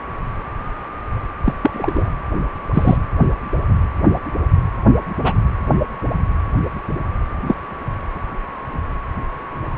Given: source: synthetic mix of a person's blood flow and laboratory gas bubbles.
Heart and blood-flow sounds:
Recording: Doppler ultrasound of blood flow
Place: precordium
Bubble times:
1.44-1.54 s: bubbles
1.62-2.10 s: bubbles
2.73-2.98 s: bubbles
5.24-5.33 s: bubbles
7.47-7.54 s: bubbles
From the record:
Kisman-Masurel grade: 123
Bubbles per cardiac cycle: 1 to 2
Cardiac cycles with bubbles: 10 to 50%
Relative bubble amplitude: loud (0.450 to 0.775)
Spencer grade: 2 (many but less than half of the cardiac periods contain bubble signals, singularly or in groups)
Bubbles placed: anywhere in the cardiac cycle

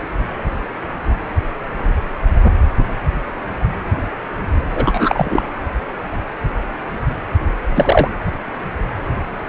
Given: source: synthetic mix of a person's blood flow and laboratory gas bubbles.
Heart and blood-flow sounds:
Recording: Doppler ultrasound of blood flow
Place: precordium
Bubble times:
4.75-5.43 s: bubbles
7.76-8.08 s: bubbles
From the record:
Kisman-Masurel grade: 213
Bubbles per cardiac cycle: several, 3 to 8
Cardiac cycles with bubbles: 1 to 10%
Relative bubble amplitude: loud (0.450 to 0.775)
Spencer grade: 1 (occasional bubble signal discernible with the cardiac motion signal, with majority of cardiac periods free of bubbles)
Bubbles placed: anywhere in the cardiac cycle

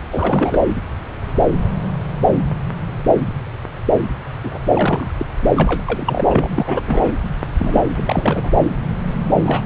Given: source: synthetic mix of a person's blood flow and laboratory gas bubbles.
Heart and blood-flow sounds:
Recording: Doppler ultrasound of blood flow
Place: subclavian vein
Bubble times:
0.10-0.62 s: bubbles
4.44-4.58 s: bubbles
4.62-5.10 s: bubbles
5.17-5.25 s: bubbles
5.42-5.50 s: bubbles
5.56-7.13 s: bubbles
7.58-7.80 s: bubbles
7.93-8.58 s: bubbles
9.42-9.62 s: bubbles
From the record:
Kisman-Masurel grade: 332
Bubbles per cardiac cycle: rolling drumbeat, 9 or more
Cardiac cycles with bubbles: 50 to 99%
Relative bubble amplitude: moderate (0.250 to 0.450)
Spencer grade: 3 (all of the cardiac periods contain showers or single bubble signals, but not dominating or overriding the cardiac motion signals)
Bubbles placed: anywhere in the cardiac cycle

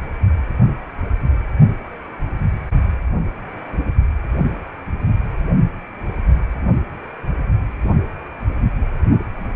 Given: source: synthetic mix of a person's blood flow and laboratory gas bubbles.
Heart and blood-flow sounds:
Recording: Doppler ultrasound of blood flow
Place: precordium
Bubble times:
no bubbles
From the record:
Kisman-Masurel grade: 000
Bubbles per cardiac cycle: 0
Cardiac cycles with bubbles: 0%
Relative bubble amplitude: no bubbles discernible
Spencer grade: 0 (complete lack of bubble signals)

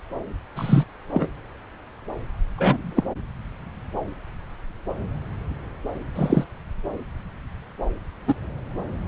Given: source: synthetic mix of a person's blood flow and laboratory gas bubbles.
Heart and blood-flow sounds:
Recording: Doppler ultrasound of blood flow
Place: subclavian vein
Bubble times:
0.55-0.84 s: bubbles
1.14-1.28 s: bubbles
2.57-3.04 s: bubbles
6.16-6.44 s: bubbles
8.27-8.34 s: bubbles
From the record:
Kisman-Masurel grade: 123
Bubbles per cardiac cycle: 1 to 2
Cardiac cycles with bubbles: 10 to 50%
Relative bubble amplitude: loud (0.450 to 0.775)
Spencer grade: 2 (many but less than half of the cardiac periods contain bubble signals, singularly or in groups)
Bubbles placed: anywhere in the cardiac cycle

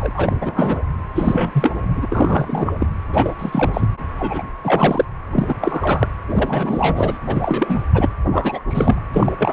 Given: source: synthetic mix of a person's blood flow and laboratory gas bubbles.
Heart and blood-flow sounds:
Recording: Doppler ultrasound of blood flow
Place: precordium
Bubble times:
0.00-0.11 s: bubbles
0.15-0.36 s: bubbles
0.41-0.79 s: bubbles
1.15-2.73 s: bubbles
2.79-2.86 s: bubbles
3.12-3.34 s: bubbles
3.38-3.87 s: bubbles
4.19-4.43 s: bubbles
4.64-5.05 s: bubbles
5.32-5.55 s: bubbles
5.61-6.08 s: bubbles
6.29-7.19 s: bubbles
7.27-7.83 s: bubbles
7.93-8.08 s: bubbles
8.31-8.59 s: bubbles
8.68-9.01 s: bubbles
9.13-9.32 s: bubbles
9.38-9.52 s: bubbles
From the record:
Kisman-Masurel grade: 343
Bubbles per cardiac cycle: rolling drumbeat, 9 or more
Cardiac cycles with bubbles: 100%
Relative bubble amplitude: loud (0.450 to 0.775)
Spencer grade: 3 (all of the cardiac periods contain showers or single bubble signals, but not dominating or overriding the cardiac motion signals)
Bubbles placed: anywhere in the cardiac cycle

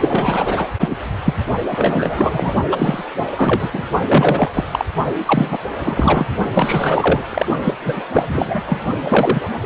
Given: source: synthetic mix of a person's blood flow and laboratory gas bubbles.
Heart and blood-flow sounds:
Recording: Doppler ultrasound of blood flow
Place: precordium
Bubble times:
0.00-0.68 s: bubbles
0.80-0.96 s: bubbles
1.25-1.34 s: bubbles
1.71-2.54 s: bubbles
2.71-3.04 s: bubbles
3.18-3.23 s: bubbles
3.35-3.70 s: bubbles
3.73-3.85 s: bubbles
4.07-4.49 s: bubbles
4.53-4.64 s: bubbles
4.71-4.85 s: bubbles
5.26-5.58 s: bubbles
5.83-6.26 s: bubbles
6.53-7.24 s: bubbles
7.29-7.46 s: bubbles
7.62-7.74 s: bubbles
7.81-8.04 s: bubbles
8.12-8.25 s: bubbles
8.29-8.61 s: bubbles
8.66-8.81 s: bubbles
9.04-9.42 s: bubbles
9.61-9.66 s: bubbles
From the record:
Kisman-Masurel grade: 343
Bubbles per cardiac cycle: rolling drumbeat, 9 or more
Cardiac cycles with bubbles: 100%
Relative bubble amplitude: loud (0.450 to 0.775)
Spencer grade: 3 (all of the cardiac periods contain showers or single bubble signals, but not dominating or overriding the cardiac motion signals)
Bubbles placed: only in the low amplitude regions of the cardiac cycle

